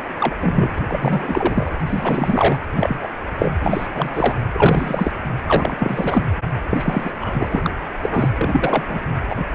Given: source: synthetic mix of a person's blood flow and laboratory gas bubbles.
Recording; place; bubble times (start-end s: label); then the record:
Doppler ultrasound of blood flow; precordium
0.00-0.03 s: bubbles
0.19-0.36 s: bubbles
0.40-0.70 s: bubbles
0.76-0.78 s: bubbles
0.88-1.73 s: bubbles
1.79-1.82 s: bubbles
1.86-2.60 s: bubbles
2.75-3.08 s: bubbles
3.38-3.52 s: bubbles
3.62-3.87 s: bubbles
3.93-4.09 s: bubbles
4.14-4.34 s: bubbles
4.54-5.12 s: bubbles
5.46-5.75 s: bubbles
5.79-6.25 s: bubbles
6.70-7.12 s: bubbles
7.21-7.61 s: bubbles
7.63-7.70 s: bubbles
8.02-8.29 s: bubbles
8.38-8.84 s: bubbles
8.88-8.99 s: bubbles
9.29-9.37 s: bubbles
From the record:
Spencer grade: 3 (all of the cardiac periods contain showers or single bubble signals, but not dominating or overriding the cardiac motion signals); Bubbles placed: anywhere in the cardiac cycle